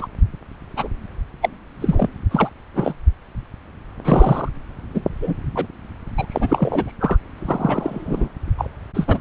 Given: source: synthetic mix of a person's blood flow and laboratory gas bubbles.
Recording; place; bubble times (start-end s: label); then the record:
Doppler ultrasound of blood flow; subclavian vein
0.00-0.07 s: bubbles
0.76-0.88 s: bubbles
1.41-1.50 s: bubbles
1.80-2.07 s: bubbles
2.30-2.49 s: bubbles
2.75-2.93 s: bubbles
4.04-4.48 s: bubbles
4.94-5.01 s: bubbles
5.21-5.33 s: bubbles
5.55-5.67 s: bubbles
6.17-6.26 s: bubbles
6.29-6.93 s: bubbles
7.00-7.17 s: bubbles
7.38-8.28 s: bubbles
8.58-8.70 s: bubbles
8.94-9.19 s: bubbles
From the record:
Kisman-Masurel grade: 233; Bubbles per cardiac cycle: several, 3 to 8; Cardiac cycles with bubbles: 50 to 99%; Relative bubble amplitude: loud (0.450 to 0.775); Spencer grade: 3 (all of the cardiac periods contain showers or single bubble signals, but not dominating or overriding the cardiac motion signals); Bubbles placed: anywhere in the cardiac cycle